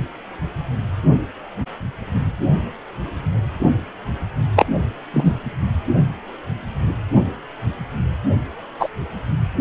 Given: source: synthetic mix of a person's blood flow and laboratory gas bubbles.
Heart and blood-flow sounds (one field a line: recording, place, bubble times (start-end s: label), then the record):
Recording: Doppler ultrasound of blood flow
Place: precordium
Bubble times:
4.55-4.66 s: bubbles
5.13-5.34 s: bubbles
8.79-8.89 s: bubbles
From the record:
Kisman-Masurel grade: 123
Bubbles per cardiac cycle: 1 to 2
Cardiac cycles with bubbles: 10 to 50%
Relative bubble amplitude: loud (0.450 to 0.775)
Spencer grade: 2 (many but less than half of the cardiac periods contain bubble signals, singularly or in groups)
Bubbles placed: only in the low amplitude regions of the cardiac cycle